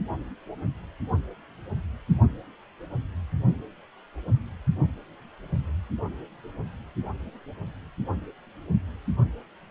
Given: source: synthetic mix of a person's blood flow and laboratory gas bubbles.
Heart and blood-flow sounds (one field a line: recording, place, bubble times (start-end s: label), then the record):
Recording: Doppler ultrasound of blood flow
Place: precordium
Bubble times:
no bubbles
From the record:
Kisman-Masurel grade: 000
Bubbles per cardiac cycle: 0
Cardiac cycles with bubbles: 0%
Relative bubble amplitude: no bubbles discernible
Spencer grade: 0 (complete lack of bubble signals)